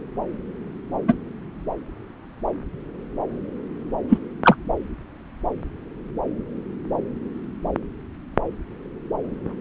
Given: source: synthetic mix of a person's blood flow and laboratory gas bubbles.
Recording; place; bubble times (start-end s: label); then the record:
Doppler ultrasound of blood flow; subclavian vein
1.07-1.14 s: bubbles
4.08-4.18 s: bubbles
4.44-4.55 s: bubbles
From the record:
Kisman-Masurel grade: 123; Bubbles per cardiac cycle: 1 to 2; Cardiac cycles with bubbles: 10 to 50%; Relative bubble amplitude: loud (0.450 to 0.775); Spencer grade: 2 (many but less than half of the cardiac periods contain bubble signals, singularly or in groups); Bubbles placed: anywhere in the cardiac cycle